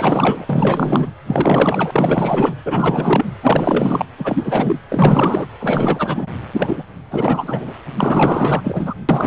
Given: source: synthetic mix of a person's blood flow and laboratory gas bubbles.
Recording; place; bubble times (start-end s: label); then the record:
Doppler ultrasound of blood flow; precordium
0.00-0.46 s: bubbles
0.49-1.13 s: bubbles
1.27-2.55 s: bubbles
2.65-3.25 s: bubbles
3.43-4.05 s: bubbles
4.18-4.79 s: bubbles
4.88-5.46 s: bubbles
5.60-6.27 s: bubbles
6.56-6.83 s: bubbles
7.11-7.73 s: bubbles
7.98-8.93 s: bubbles
9.08-9.27 s: bubbles
From the record:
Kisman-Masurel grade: 444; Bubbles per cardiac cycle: continuous sound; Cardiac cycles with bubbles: 100%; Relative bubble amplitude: maximal (0.775 to 0.999); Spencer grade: 4 (maximum detectable bubble signal sounding continuously throughout systole and diastole of every cardiac period, and overriding the amplitude of the normal cardiac signals); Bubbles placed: anywhere in the cardiac cycle